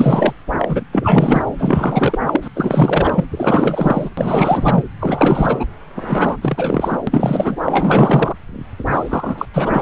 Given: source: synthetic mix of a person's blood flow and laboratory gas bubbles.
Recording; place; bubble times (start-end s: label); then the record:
Doppler ultrasound of blood flow; subclavian vein
0.00-0.32 s: bubbles
0.58-0.84 s: bubbles
0.92-1.43 s: bubbles
1.58-2.19 s: bubbles
2.25-2.48 s: bubbles
2.55-3.24 s: bubbles
3.30-4.09 s: bubbles
4.17-4.83 s: bubbles
5.00-5.66 s: bubbles
5.95-6.37 s: bubbles
6.41-6.98 s: bubbles
7.07-7.57 s: bubbles
7.65-8.36 s: bubbles
8.86-9.46 s: bubbles
9.53-9.82 s: bubbles
From the record:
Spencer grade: 4 (maximum detectable bubble signal sounding continuously throughout systole and diastole of every cardiac period, and overriding the amplitude of the normal cardiac signals); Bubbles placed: anywhere in the cardiac cycle